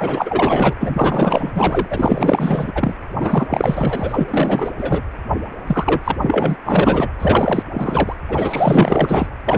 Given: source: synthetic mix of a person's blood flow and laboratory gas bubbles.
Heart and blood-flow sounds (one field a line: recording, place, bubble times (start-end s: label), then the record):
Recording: Doppler ultrasound of blood flow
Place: precordium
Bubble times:
0.00-0.75 s: bubbles
0.80-2.72 s: bubbles
2.75-2.95 s: bubbles
3.20-4.71 s: bubbles
4.78-5.01 s: bubbles
5.67-6.00 s: bubbles
6.04-6.17 s: bubbles
6.21-6.57 s: bubbles
6.65-7.08 s: bubbles
7.20-7.63 s: bubbles
7.73-8.15 s: bubbles
8.29-9.27 s: bubbles
9.45-9.58 s: bubbles
From the record:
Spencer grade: 4 (maximum detectable bubble signal sounding continuously throughout systole and diastole of every cardiac period, and overriding the amplitude of the normal cardiac signals)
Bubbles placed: anywhere in the cardiac cycle